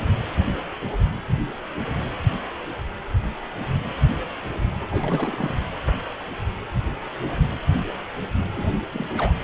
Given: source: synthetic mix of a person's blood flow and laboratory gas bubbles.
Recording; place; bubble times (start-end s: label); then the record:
Doppler ultrasound of blood flow; precordium
4.90-5.57 s: bubbles
8.56-8.66 s: bubbles
8.94-9.33 s: bubbles
From the record:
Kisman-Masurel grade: 221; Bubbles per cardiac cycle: several, 3 to 8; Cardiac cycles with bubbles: 10 to 50%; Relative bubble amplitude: barely perceptible (0.100 to 0.250); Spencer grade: 2 (many but less than half of the cardiac periods contain bubble signals, singularly or in groups); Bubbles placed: anywhere in the cardiac cycle